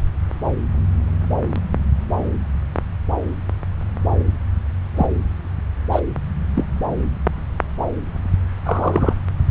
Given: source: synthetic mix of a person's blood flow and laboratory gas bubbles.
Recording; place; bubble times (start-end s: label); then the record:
Doppler ultrasound of blood flow; subclavian vein
4.96-5.06 s: bubbles
5.92-6.00 s: bubbles
6.56-6.66 s: bubbles
8.65-9.13 s: bubbles
From the record:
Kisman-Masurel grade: 123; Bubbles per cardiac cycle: 1 to 2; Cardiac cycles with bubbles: 10 to 50%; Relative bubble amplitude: loud (0.450 to 0.775); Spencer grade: 2 (many but less than half of the cardiac periods contain bubble signals, singularly or in groups); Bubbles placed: anywhere in the cardiac cycle